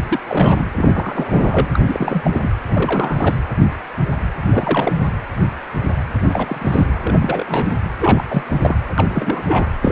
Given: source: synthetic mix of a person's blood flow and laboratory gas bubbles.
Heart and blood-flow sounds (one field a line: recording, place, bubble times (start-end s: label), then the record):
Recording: Doppler ultrasound of blood flow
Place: precordium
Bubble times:
0.09-0.19 s: bubbles
0.29-0.63 s: bubbles
0.76-1.69 s: bubbles
1.73-1.79 s: bubbles
1.85-2.50 s: bubbles
2.68-3.38 s: bubbles
4.42-4.92 s: bubbles
5.02-5.11 s: bubbles
6.29-7.73 s: bubbles
8.00-8.23 s: bubbles
8.29-8.44 s: bubbles
8.47-8.75 s: bubbles
8.98-9.42 s: bubbles
9.47-9.68 s: bubbles
9.81-9.92 s: bubbles
From the record:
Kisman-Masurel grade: 332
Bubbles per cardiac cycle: rolling drumbeat, 9 or more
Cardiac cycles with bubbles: 50 to 99%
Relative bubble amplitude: moderate (0.250 to 0.450)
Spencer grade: 3 (all of the cardiac periods contain showers or single bubble signals, but not dominating or overriding the cardiac motion signals)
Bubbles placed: anywhere in the cardiac cycle